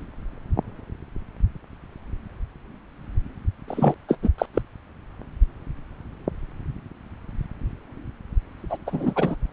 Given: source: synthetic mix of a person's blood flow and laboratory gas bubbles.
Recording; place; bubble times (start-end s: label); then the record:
Doppler ultrasound of blood flow; subclavian vein
3.68-3.95 s: bubbles
4.08-4.17 s: bubbles
4.22-4.30 s: bubbles
4.38-4.46 s: bubbles
4.54-4.62 s: bubbles
8.69-8.78 s: bubbles
8.86-9.37 s: bubbles
From the record:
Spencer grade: 2 (many but less than half of the cardiac periods contain bubble signals, singularly or in groups); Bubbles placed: anywhere in the cardiac cycle